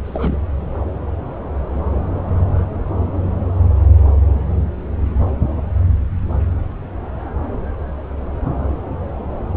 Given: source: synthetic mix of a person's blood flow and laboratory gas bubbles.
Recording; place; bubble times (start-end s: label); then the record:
Doppler ultrasound of blood flow; subclavian vein
0.05-0.38 s: bubbles
From the record:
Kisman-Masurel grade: 211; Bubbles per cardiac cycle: several, 3 to 8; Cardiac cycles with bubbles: 1 to 10%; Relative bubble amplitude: barely perceptible (0.100 to 0.250); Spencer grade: 1 (occasional bubble signal discernible with the cardiac motion signal, with majority of cardiac periods free of bubbles); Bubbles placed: anywhere in the cardiac cycle